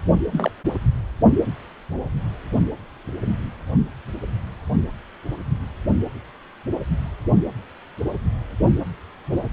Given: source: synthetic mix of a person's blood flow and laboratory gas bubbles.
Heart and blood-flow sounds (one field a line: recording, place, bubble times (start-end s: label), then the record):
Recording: Doppler ultrasound of blood flow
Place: precordium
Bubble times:
0.32-0.51 s: bubbles
From the record:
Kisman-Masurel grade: 112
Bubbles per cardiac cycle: 1 to 2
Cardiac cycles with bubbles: 1 to 10%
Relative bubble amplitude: moderate (0.250 to 0.450)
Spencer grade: 1 (occasional bubble signal discernible with the cardiac motion signal, with majority of cardiac periods free of bubbles)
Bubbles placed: only in the low amplitude regions of the cardiac cycle